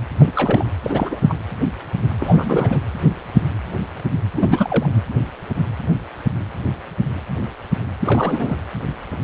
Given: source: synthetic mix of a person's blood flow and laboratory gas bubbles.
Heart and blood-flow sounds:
Doppler ultrasound of blood flow; precordium
0.18-0.31 s: bubbles
0.36-0.67 s: bubbles
0.82-1.20 s: bubbles
1.23-1.34 s: bubbles
2.19-2.80 s: bubbles
4.36-4.95 s: bubbles
8.00-8.58 s: bubbles
From the record:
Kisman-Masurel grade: 332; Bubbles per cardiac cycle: rolling drumbeat, 9 or more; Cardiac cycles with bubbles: 50 to 99%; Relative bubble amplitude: moderate (0.250 to 0.450); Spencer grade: 3 (all of the cardiac periods contain showers or single bubble signals, but not dominating or overriding the cardiac motion signals); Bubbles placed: anywhere in the cardiac cycle

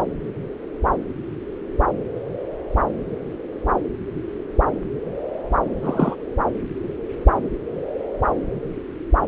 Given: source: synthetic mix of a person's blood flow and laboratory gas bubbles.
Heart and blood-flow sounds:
Doppler ultrasound of blood flow; subclavian vein
5.82-6.15 s: bubbles
From the record:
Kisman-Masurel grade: 112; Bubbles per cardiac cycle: 1 to 2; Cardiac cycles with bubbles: 1 to 10%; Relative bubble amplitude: moderate (0.250 to 0.450); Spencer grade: 1 (occasional bubble signal discernible with the cardiac motion signal, with majority of cardiac periods free of bubbles); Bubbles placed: anywhere in the cardiac cycle

